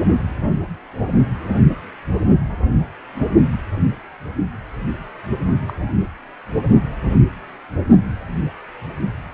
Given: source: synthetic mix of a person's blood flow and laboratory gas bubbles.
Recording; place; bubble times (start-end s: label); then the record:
Doppler ultrasound of blood flow; precordium
5.67-5.76 s: bubbles
From the record:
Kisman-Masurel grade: 112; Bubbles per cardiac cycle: 1 to 2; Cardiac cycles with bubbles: 1 to 10%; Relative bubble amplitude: moderate (0.250 to 0.450); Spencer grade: 1 (occasional bubble signal discernible with the cardiac motion signal, with majority of cardiac periods free of bubbles); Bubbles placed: only in the low amplitude regions of the cardiac cycle